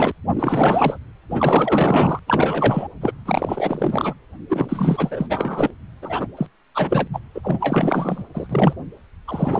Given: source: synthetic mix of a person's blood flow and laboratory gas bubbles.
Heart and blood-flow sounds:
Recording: Doppler ultrasound of blood flow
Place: precordium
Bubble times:
0.00-0.11 s: bubbles
0.29-0.98 s: bubbles
1.30-2.19 s: bubbles
2.26-2.88 s: bubbles
3.01-3.12 s: bubbles
3.25-4.14 s: bubbles
4.48-5.71 s: bubbles
6.01-6.27 s: bubbles
6.37-6.46 s: bubbles
6.75-7.08 s: bubbles
7.13-7.20 s: bubbles
7.34-8.24 s: bubbles
8.34-8.74 s: bubbles
9.28-9.60 s: bubbles
From the record:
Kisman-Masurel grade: 444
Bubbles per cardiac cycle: continuous sound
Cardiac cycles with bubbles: 100%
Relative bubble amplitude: maximal (0.775 to 0.999)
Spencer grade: 4 (maximum detectable bubble signal sounding continuously throughout systole and diastole of every cardiac period, and overriding the amplitude of the normal cardiac signals)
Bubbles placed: anywhere in the cardiac cycle

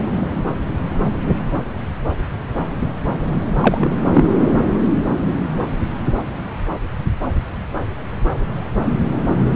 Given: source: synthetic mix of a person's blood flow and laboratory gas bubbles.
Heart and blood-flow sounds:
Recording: Doppler ultrasound of blood flow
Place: subclavian vein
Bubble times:
3.60-3.96 s: bubbles
4.14-4.38 s: bubbles
From the record:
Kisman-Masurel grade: 213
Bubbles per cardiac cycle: several, 3 to 8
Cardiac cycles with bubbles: 1 to 10%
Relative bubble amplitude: loud (0.450 to 0.775)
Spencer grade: 1 (occasional bubble signal discernible with the cardiac motion signal, with majority of cardiac periods free of bubbles)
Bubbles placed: anywhere in the cardiac cycle

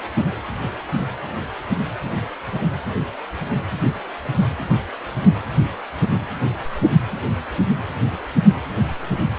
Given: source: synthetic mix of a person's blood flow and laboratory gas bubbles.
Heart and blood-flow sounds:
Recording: Doppler ultrasound of blood flow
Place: precordium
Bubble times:
no bubbles
From the record:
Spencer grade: 0 (complete lack of bubble signals)

